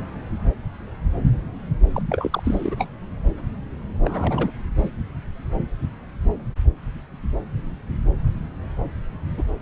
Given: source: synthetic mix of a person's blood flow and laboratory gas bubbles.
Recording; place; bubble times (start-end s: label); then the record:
Doppler ultrasound of blood flow; subclavian vein
1.93-2.02 s: bubbles
2.10-2.87 s: bubbles
4.03-4.50 s: bubbles
4.79-4.90 s: bubbles
9.37-9.44 s: bubbles
From the record:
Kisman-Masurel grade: 222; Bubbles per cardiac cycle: several, 3 to 8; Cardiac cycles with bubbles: 10 to 50%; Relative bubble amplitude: moderate (0.250 to 0.450); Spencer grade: 2 (many but less than half of the cardiac periods contain bubble signals, singularly or in groups); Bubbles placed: anywhere in the cardiac cycle